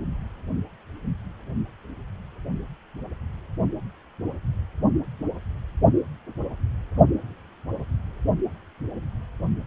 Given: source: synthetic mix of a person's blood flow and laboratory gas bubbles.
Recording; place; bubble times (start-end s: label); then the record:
Doppler ultrasound of blood flow; precordium
no bubbles
From the record:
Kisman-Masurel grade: 000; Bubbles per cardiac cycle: 0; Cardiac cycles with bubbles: 0%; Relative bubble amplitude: no bubbles discernible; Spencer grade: 0 (complete lack of bubble signals)